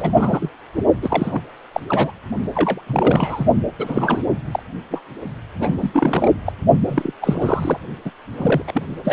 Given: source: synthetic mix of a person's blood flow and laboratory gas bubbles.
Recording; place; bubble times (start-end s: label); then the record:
Doppler ultrasound of blood flow; precordium
0.00-0.49 s: bubbles
1.02-1.41 s: bubbles
1.73-1.81 s: bubbles
1.89-2.12 s: bubbles
2.55-2.81 s: bubbles
2.87-3.45 s: bubbles
3.78-4.24 s: bubbles
4.51-4.62 s: bubbles
4.91-5.01 s: bubbles
5.59-5.75 s: bubbles
5.78-5.90 s: bubbles
5.93-6.32 s: bubbles
6.46-6.53 s: bubbles
6.88-7.12 s: bubbles
7.21-7.79 s: bubbles
8.05-8.10 s: bubbles
8.33-8.62 s: bubbles
8.66-8.82 s: bubbles
9.04-9.13 s: bubbles
From the record:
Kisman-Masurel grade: 342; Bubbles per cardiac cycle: rolling drumbeat, 9 or more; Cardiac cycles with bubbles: 100%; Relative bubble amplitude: moderate (0.250 to 0.450); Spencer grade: 3 (all of the cardiac periods contain showers or single bubble signals, but not dominating or overriding the cardiac motion signals); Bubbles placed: only in the low amplitude regions of the cardiac cycle